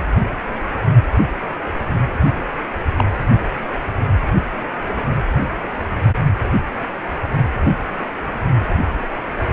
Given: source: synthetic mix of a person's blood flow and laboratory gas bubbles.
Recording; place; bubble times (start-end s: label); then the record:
Doppler ultrasound of blood flow; precordium
2.96-3.04 s: bubbles
From the record:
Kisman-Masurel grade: 123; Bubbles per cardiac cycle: 1 to 2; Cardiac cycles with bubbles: 10 to 50%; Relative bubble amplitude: loud (0.450 to 0.775); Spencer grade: 2 (many but less than half of the cardiac periods contain bubble signals, singularly or in groups); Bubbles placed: only in the low amplitude regions of the cardiac cycle